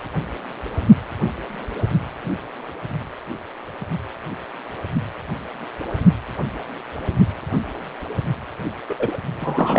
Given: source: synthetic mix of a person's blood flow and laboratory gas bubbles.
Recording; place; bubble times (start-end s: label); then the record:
Doppler ultrasound of blood flow; precordium
8.89-8.95 s: bubbles
8.99-9.16 s: bubbles
9.40-9.79 s: bubbles
From the record:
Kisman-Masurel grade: 213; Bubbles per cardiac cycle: several, 3 to 8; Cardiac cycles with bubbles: 1 to 10%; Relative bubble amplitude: loud (0.450 to 0.775); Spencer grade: 1 (occasional bubble signal discernible with the cardiac motion signal, with majority of cardiac periods free of bubbles); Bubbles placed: only in the low amplitude regions of the cardiac cycle